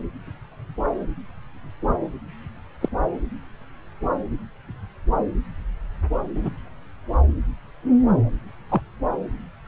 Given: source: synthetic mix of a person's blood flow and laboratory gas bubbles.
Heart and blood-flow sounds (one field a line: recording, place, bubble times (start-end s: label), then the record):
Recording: Doppler ultrasound of blood flow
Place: subclavian vein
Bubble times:
2.81-2.89 s: bubbles
6.35-6.50 s: bubbles
8.69-8.81 s: bubbles
From the record:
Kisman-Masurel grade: 122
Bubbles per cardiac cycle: 1 to 2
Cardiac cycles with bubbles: 10 to 50%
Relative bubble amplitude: moderate (0.250 to 0.450)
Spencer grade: 2 (many but less than half of the cardiac periods contain bubble signals, singularly or in groups)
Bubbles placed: anywhere in the cardiac cycle